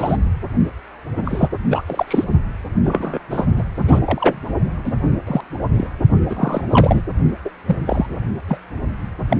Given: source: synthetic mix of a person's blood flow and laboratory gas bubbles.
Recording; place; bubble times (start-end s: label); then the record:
Doppler ultrasound of blood flow; precordium
0.00-0.17 s: bubbles
1.16-1.49 s: bubbles
1.70-1.84 s: bubbles
1.86-2.24 s: bubbles
2.84-3.19 s: bubbles
3.30-3.46 s: bubbles
3.56-3.63 s: bubbles
3.79-4.00 s: bubbles
4.05-4.43 s: bubbles
4.83-4.93 s: bubbles
5.26-5.41 s: bubbles
5.74-5.88 s: bubbles
6.29-6.61 s: bubbles
6.70-7.01 s: bubbles
7.45-7.50 s: bubbles
7.67-7.77 s: bubbles
7.87-8.06 s: bubbles
8.48-8.59 s: bubbles
9.29-9.37 s: bubbles
From the record:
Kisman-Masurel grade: 243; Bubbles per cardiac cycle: several, 3 to 8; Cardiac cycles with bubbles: 100%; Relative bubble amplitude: loud (0.450 to 0.775); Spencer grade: 3 (all of the cardiac periods contain showers or single bubble signals, but not dominating or overriding the cardiac motion signals); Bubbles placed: only in the low amplitude regions of the cardiac cycle